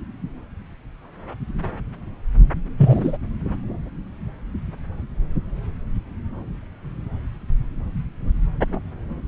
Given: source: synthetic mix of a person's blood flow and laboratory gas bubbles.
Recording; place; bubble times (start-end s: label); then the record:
Doppler ultrasound of blood flow; subclavian vein
2.77-3.17 s: bubbles
From the record:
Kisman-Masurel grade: 113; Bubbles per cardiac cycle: 1 to 2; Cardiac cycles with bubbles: 1 to 10%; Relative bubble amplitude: loud (0.450 to 0.775); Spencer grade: 1 (occasional bubble signal discernible with the cardiac motion signal, with majority of cardiac periods free of bubbles); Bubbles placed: anywhere in the cardiac cycle